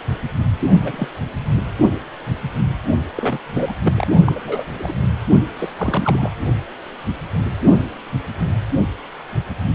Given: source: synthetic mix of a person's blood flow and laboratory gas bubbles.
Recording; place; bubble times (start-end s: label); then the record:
Doppler ultrasound of blood flow; precordium
0.59-0.67 s: bubbles
0.76-1.09 s: bubbles
3.15-3.38 s: bubbles
3.47-3.72 s: bubbles
3.81-4.08 s: bubbles
4.25-4.39 s: bubbles
4.44-4.64 s: bubbles
4.73-4.92 s: bubbles
5.55-5.72 s: bubbles
5.77-6.33 s: bubbles
From the record:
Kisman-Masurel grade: 222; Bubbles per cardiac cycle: several, 3 to 8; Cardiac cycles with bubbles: 10 to 50%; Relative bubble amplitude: moderate (0.250 to 0.450); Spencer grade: 2 (many but less than half of the cardiac periods contain bubble signals, singularly or in groups); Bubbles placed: only in the low amplitude regions of the cardiac cycle